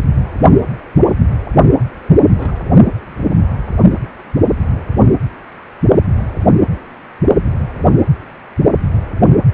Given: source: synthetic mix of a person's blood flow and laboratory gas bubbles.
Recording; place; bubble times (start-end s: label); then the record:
Doppler ultrasound of blood flow; precordium
2.25-2.56 s: bubbles
From the record:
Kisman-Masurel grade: 111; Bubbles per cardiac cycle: 1 to 2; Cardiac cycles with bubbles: 1 to 10%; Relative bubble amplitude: barely perceptible (0.100 to 0.250); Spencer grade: 1 (occasional bubble signal discernible with the cardiac motion signal, with majority of cardiac periods free of bubbles); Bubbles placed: only in the low amplitude regions of the cardiac cycle